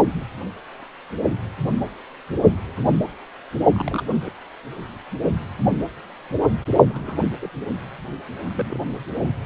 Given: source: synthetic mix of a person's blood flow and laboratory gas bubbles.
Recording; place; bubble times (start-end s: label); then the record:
Doppler ultrasound of blood flow; precordium
3.73-4.03 s: bubbles
4.24-4.30 s: bubbles
6.86-7.16 s: bubbles
7.41-7.50 s: bubbles
8.44-8.79 s: bubbles
From the record:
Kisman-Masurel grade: 121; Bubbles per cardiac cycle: 1 to 2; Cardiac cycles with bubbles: 10 to 50%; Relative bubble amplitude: barely perceptible (0.100 to 0.250); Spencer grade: 2 (many but less than half of the cardiac periods contain bubble signals, singularly or in groups); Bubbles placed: only in the low amplitude regions of the cardiac cycle